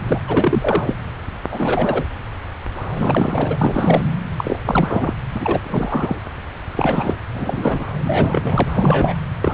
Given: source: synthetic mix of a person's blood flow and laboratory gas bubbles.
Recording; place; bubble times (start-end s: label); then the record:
Doppler ultrasound of blood flow; subclavian vein
0.07-0.20 s: bubbles
0.27-0.94 s: bubbles
1.52-2.04 s: bubbles
2.95-4.01 s: bubbles
4.38-4.60 s: bubbles
4.65-5.14 s: bubbles
5.33-5.60 s: bubbles
5.64-6.16 s: bubbles
6.74-7.14 s: bubbles
7.33-7.85 s: bubbles
8.04-8.68 s: bubbles
8.73-9.20 s: bubbles
9.41-9.54 s: bubbles
From the record:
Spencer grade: 3 (all of the cardiac periods contain showers or single bubble signals, but not dominating or overriding the cardiac motion signals); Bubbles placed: anywhere in the cardiac cycle